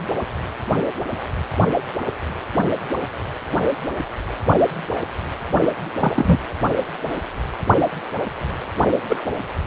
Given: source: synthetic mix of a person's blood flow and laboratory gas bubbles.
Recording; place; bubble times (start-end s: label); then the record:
Doppler ultrasound of blood flow; precordium
6.00-6.38 s: bubbles
9.08-9.16 s: bubbles
From the record:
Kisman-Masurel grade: 123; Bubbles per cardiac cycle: 1 to 2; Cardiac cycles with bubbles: 10 to 50%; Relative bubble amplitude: loud (0.450 to 0.775); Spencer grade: 2 (many but less than half of the cardiac periods contain bubble signals, singularly or in groups); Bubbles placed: only in the low amplitude regions of the cardiac cycle